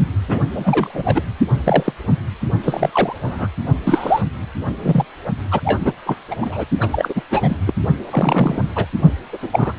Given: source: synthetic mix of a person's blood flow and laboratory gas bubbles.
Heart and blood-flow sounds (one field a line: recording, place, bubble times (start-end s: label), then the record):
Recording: Doppler ultrasound of blood flow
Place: precordium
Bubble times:
0.28-0.39 s: bubbles
0.55-1.22 s: bubbles
1.65-1.92 s: bubbles
2.63-2.90 s: bubbles
2.92-3.14 s: bubbles
3.24-3.47 s: bubbles
3.83-4.21 s: bubbles
4.82-5.05 s: bubbles
5.51-5.60 s: bubbles
5.64-5.92 s: bubbles
6.06-6.16 s: bubbles
6.30-6.35 s: bubbles
6.41-6.64 s: bubbles
6.80-6.88 s: bubbles
6.92-7.21 s: bubbles
7.30-7.56 s: bubbles
7.67-7.72 s: bubbles
8.11-8.62 s: bubbles
8.75-8.86 s: bubbles
9.32-9.38 s: bubbles
9.42-9.48 s: bubbles
9.52-9.72 s: bubbles
From the record:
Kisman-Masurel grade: 243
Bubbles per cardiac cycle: several, 3 to 8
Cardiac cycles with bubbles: 100%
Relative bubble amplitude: loud (0.450 to 0.775)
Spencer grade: 3 (all of the cardiac periods contain showers or single bubble signals, but not dominating or overriding the cardiac motion signals)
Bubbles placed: only in the low amplitude regions of the cardiac cycle